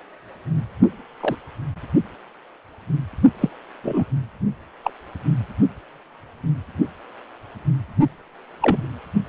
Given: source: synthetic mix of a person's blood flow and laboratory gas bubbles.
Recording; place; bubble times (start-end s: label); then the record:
Doppler ultrasound of blood flow; precordium
1.20-1.36 s: bubbles
3.40-3.49 s: bubbles
3.83-4.04 s: bubbles
4.84-4.90 s: bubbles
8.62-8.87 s: bubbles
From the record:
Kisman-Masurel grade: 122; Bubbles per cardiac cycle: 1 to 2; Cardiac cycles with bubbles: 10 to 50%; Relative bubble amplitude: moderate (0.250 to 0.450); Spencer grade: 2 (many but less than half of the cardiac periods contain bubble signals, singularly or in groups); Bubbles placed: only in the low amplitude regions of the cardiac cycle